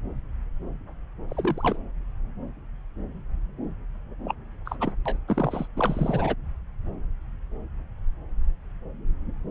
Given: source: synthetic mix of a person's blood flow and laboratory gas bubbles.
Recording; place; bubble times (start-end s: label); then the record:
Doppler ultrasound of blood flow; subclavian vein
1.29-1.79 s: bubbles
4.24-4.34 s: bubbles
4.66-4.75 s: bubbles
4.80-4.92 s: bubbles
5.05-5.17 s: bubbles
5.28-5.67 s: bubbles
5.76-6.35 s: bubbles
From the record:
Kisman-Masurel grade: 221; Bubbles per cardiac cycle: several, 3 to 8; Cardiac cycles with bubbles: 10 to 50%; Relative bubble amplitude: barely perceptible (0.100 to 0.250); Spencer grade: 2 (many but less than half of the cardiac periods contain bubble signals, singularly or in groups); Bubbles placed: anywhere in the cardiac cycle